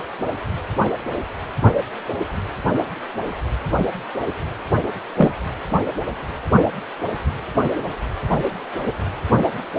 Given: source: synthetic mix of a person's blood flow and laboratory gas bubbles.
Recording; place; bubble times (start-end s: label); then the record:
Doppler ultrasound of blood flow; precordium
5.17-5.31 s: bubbles
From the record:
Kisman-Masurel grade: 113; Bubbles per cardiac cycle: 1 to 2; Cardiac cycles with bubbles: 1 to 10%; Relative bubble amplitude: loud (0.450 to 0.775); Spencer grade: 1 (occasional bubble signal discernible with the cardiac motion signal, with majority of cardiac periods free of bubbles); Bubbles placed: anywhere in the cardiac cycle